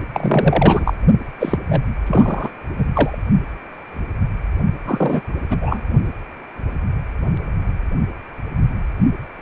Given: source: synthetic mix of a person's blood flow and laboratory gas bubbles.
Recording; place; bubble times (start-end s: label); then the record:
Doppler ultrasound of blood flow; precordium
0.13-0.93 s: bubbles
1.39-1.59 s: bubbles
1.66-1.89 s: bubbles
2.06-2.51 s: bubbles
2.77-2.86 s: bubbles
2.93-3.18 s: bubbles
4.85-5.21 s: bubbles
5.50-5.57 s: bubbles
5.60-5.80 s: bubbles
From the record:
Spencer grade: 3 (all of the cardiac periods contain showers or single bubble signals, but not dominating or overriding the cardiac motion signals); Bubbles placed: only in the low amplitude regions of the cardiac cycle